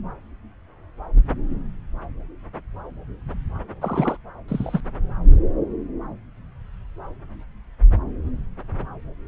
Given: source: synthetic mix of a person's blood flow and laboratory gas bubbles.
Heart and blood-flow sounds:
Doppler ultrasound of blood flow; subclavian vein
3.81-4.17 s: bubbles
4.48-4.81 s: bubbles
From the record:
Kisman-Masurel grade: 222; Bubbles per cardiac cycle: several, 3 to 8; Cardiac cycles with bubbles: 10 to 50%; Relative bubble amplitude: moderate (0.250 to 0.450); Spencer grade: 2 (many but less than half of the cardiac periods contain bubble signals, singularly or in groups); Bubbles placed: anywhere in the cardiac cycle

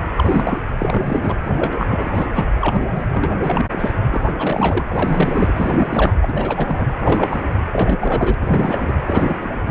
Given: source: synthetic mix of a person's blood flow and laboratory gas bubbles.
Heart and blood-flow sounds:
Doppler ultrasound of blood flow; precordium
0.15-0.59 s: bubbles
0.78-1.34 s: bubbles
1.56-1.76 s: bubbles
1.79-2.10 s: bubbles
2.15-2.27 s: bubbles
2.34-2.51 s: bubbles
2.60-3.39 s: bubbles
3.44-3.66 s: bubbles
3.71-3.92 s: bubbles
4.09-6.14 s: bubbles
6.21-6.86 s: bubbles
6.97-7.42 s: bubbles
7.72-8.35 s: bubbles
8.40-8.93 s: bubbles
9.06-9.50 s: bubbles
9.66-9.71 s: bubbles
From the record:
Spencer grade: 3 (all of the cardiac periods contain showers or single bubble signals, but not dominating or overriding the cardiac motion signals); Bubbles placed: anywhere in the cardiac cycle

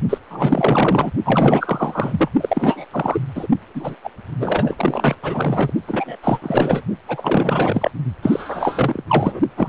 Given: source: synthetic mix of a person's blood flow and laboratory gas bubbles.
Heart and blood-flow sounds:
Doppler ultrasound of blood flow; precordium
0.09-0.18 s: bubbles
0.30-1.12 s: bubbles
1.23-2.29 s: bubbles
2.40-2.85 s: bubbles
2.90-3.21 s: bubbles
3.34-3.47 s: bubbles
3.75-3.96 s: bubbles
4.04-4.10 s: bubbles
4.39-5.16 s: bubbles
5.22-5.74 s: bubbles
5.87-6.17 s: bubbles
6.22-6.39 s: bubbles
6.42-6.81 s: bubbles
7.08-7.91 s: bubbles
8.22-9.03 s: bubbles
9.08-9.40 s: bubbles
9.57-9.69 s: bubbles
From the record:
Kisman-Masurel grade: 444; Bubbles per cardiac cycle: continuous sound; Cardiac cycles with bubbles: 100%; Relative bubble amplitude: maximal (0.775 to 0.999); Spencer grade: 4 (maximum detectable bubble signal sounding continuously throughout systole and diastole of every cardiac period, and overriding the amplitude of the normal cardiac signals); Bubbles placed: only in the low amplitude regions of the cardiac cycle

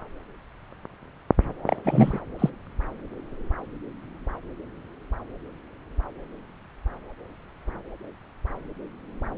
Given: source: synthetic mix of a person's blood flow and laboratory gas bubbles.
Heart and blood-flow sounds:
Doppler ultrasound of blood flow; subclavian vein
1.67-1.76 s: bubbles
1.83-2.19 s: bubbles
2.39-2.50 s: bubbles
From the record:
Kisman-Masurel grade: 212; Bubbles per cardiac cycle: several, 3 to 8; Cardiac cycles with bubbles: 1 to 10%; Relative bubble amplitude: moderate (0.250 to 0.450); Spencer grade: 1 (occasional bubble signal discernible with the cardiac motion signal, with majority of cardiac periods free of bubbles); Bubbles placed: anywhere in the cardiac cycle

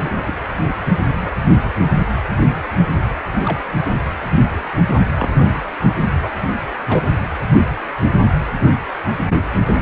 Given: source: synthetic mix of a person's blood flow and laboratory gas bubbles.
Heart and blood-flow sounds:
Doppler ultrasound of blood flow; precordium
0.05-0.22 s: bubbles
0.26-0.35 s: bubbles
1.08-1.38 s: bubbles
3.44-3.58 s: bubbles
3.88-3.95 s: bubbles
5.16-5.46 s: bubbles
6.20-6.31 s: bubbles
6.88-7.04 s: bubbles
From the record:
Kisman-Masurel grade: 122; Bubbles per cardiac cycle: 1 to 2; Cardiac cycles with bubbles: 10 to 50%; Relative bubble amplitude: moderate (0.250 to 0.450); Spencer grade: 2 (many but less than half of the cardiac periods contain bubble signals, singularly or in groups); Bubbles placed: anywhere in the cardiac cycle

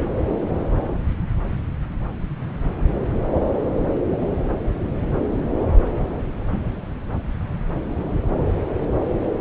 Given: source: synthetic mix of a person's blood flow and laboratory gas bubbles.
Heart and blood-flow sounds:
Doppler ultrasound of blood flow; subclavian vein
no bubbles
From the record:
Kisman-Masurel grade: 000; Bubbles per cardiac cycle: 0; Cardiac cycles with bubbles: 0%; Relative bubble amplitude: no bubbles discernible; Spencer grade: 0 (complete lack of bubble signals)

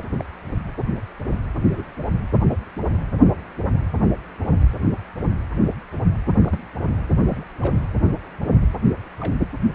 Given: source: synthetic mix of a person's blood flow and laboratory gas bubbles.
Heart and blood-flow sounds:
Doppler ultrasound of blood flow; precordium
0.10-0.24 s: bubbles
1.64-1.82 s: bubbles
6.41-6.58 s: bubbles
7.28-7.44 s: bubbles
7.62-7.74 s: bubbles
9.21-9.40 s: bubbles
From the record:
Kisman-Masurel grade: 121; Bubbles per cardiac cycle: 1 to 2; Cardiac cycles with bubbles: 10 to 50%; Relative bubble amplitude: barely perceptible (0.100 to 0.250); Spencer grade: 2 (many but less than half of the cardiac periods contain bubble signals, singularly or in groups); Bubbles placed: anywhere in the cardiac cycle

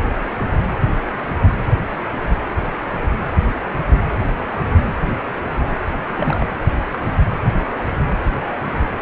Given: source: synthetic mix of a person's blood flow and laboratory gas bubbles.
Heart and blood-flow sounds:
Doppler ultrasound of blood flow; precordium
6.05-6.46 s: bubbles
6.91-7.00 s: bubbles
From the record:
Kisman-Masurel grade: 212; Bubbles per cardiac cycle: several, 3 to 8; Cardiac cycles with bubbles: 1 to 10%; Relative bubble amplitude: moderate (0.250 to 0.450); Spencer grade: 1 (occasional bubble signal discernible with the cardiac motion signal, with majority of cardiac periods free of bubbles); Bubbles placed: anywhere in the cardiac cycle

